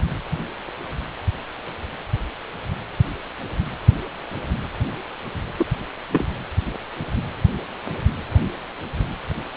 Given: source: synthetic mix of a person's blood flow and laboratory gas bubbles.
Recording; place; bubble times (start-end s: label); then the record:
Doppler ultrasound of blood flow; precordium
5.58-5.66 s: bubbles
6.12-6.25 s: bubbles
From the record:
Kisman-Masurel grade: 122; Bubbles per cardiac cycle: 1 to 2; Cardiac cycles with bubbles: 10 to 50%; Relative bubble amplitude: moderate (0.250 to 0.450); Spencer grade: 2 (many but less than half of the cardiac periods contain bubble signals, singularly or in groups); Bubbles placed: anywhere in the cardiac cycle